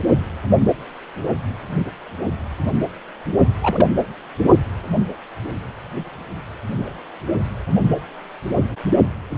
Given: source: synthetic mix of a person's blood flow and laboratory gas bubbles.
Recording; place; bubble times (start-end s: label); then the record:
Doppler ultrasound of blood flow; precordium
3.60-3.88 s: bubbles
From the record:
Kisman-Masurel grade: 112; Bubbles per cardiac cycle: 1 to 2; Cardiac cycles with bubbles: 1 to 10%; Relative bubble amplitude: moderate (0.250 to 0.450); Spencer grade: 1 (occasional bubble signal discernible with the cardiac motion signal, with majority of cardiac periods free of bubbles); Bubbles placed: only in the low amplitude regions of the cardiac cycle